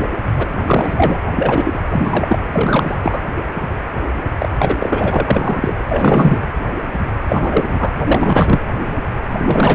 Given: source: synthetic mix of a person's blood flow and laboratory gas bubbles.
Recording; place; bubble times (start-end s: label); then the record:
Doppler ultrasound of blood flow; precordium
0.39-0.47 s: bubbles
0.66-1.18 s: bubbles
1.36-1.78 s: bubbles
1.92-2.39 s: bubbles
2.53-2.98 s: bubbles
3.03-3.21 s: bubbles
4.39-4.49 s: bubbles
4.58-4.75 s: bubbles
4.80-5.76 s: bubbles
5.89-6.42 s: bubbles
7.29-7.94 s: bubbles
8.06-8.60 s: bubbles
9.38-9.74 s: bubbles
From the record:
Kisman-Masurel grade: 333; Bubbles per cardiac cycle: rolling drumbeat, 9 or more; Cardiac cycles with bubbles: 50 to 99%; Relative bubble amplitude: loud (0.450 to 0.775); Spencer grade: 3 (all of the cardiac periods contain showers or single bubble signals, but not dominating or overriding the cardiac motion signals); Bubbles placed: anywhere in the cardiac cycle